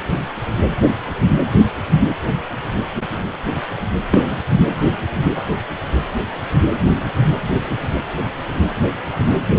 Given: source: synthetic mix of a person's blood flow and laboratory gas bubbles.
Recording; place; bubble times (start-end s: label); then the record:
Doppler ultrasound of blood flow; precordium
4.12-4.37 s: bubbles
From the record:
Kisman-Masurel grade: 113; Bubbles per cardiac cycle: 1 to 2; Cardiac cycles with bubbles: 1 to 10%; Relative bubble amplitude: loud (0.450 to 0.775); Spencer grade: 1 (occasional bubble signal discernible with the cardiac motion signal, with majority of cardiac periods free of bubbles); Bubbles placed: anywhere in the cardiac cycle